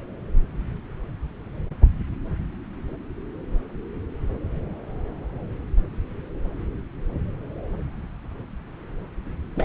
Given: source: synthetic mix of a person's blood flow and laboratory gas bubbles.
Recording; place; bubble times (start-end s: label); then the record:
Doppler ultrasound of blood flow; subclavian vein
9.55-9.65 s: bubbles
From the record:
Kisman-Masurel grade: 211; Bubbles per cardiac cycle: several, 3 to 8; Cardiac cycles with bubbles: 1 to 10%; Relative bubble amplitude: barely perceptible (0.100 to 0.250); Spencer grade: 1 (occasional bubble signal discernible with the cardiac motion signal, with majority of cardiac periods free of bubbles); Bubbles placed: anywhere in the cardiac cycle